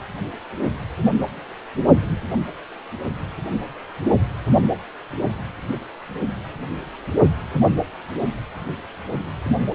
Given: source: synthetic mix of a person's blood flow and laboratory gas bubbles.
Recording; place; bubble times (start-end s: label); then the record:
Doppler ultrasound of blood flow; precordium
no bubbles
From the record:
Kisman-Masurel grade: 000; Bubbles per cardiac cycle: 0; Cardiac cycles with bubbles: 0%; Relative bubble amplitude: no bubbles discernible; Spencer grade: 0 (complete lack of bubble signals)